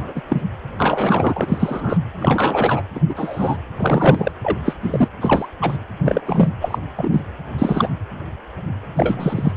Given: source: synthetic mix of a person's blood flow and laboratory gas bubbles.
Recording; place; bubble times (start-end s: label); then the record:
Doppler ultrasound of blood flow; precordium
0.00-0.23 s: bubbles
0.28-0.42 s: bubbles
0.78-1.97 s: bubbles
2.18-2.82 s: bubbles
2.94-3.00 s: bubbles
3.09-3.58 s: bubbles
3.77-4.32 s: bubbles
4.42-4.58 s: bubbles
4.65-4.75 s: bubbles
4.81-5.08 s: bubbles
5.21-5.49 s: bubbles
5.61-5.78 s: bubbles
6.04-6.21 s: bubbles
6.25-6.49 s: bubbles
6.60-6.79 s: bubbles
6.97-7.21 s: bubbles
7.58-7.89 s: bubbles
8.97-9.53 s: bubbles
From the record:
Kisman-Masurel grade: 233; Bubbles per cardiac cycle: several, 3 to 8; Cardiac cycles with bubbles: 50 to 99%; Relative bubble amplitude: loud (0.450 to 0.775); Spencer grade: 3 (all of the cardiac periods contain showers or single bubble signals, but not dominating or overriding the cardiac motion signals); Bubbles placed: anywhere in the cardiac cycle